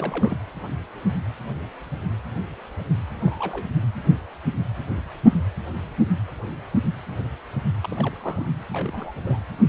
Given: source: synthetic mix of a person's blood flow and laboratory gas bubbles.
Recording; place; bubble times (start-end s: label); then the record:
Doppler ultrasound of blood flow; precordium
0.00-0.37 s: bubbles
3.21-3.66 s: bubbles
7.83-8.54 s: bubbles
8.72-9.12 s: bubbles
9.23-9.41 s: bubbles
From the record:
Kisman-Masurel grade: 221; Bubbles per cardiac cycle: several, 3 to 8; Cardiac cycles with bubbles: 10 to 50%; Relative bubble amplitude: barely perceptible (0.100 to 0.250); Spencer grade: 2 (many but less than half of the cardiac periods contain bubble signals, singularly or in groups); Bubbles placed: anywhere in the cardiac cycle